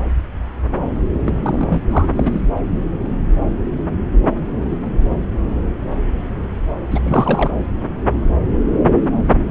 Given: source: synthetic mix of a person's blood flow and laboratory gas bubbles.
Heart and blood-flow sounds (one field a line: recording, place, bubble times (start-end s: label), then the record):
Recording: Doppler ultrasound of blood flow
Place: subclavian vein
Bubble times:
1.26-1.33 s: bubbles
1.43-1.82 s: bubbles
1.90-2.06 s: bubbles
2.16-2.41 s: bubbles
6.90-7.00 s: bubbles
7.03-7.51 s: bubbles
From the record:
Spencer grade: 2 (many but less than half of the cardiac periods contain bubble signals, singularly or in groups)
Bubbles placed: anywhere in the cardiac cycle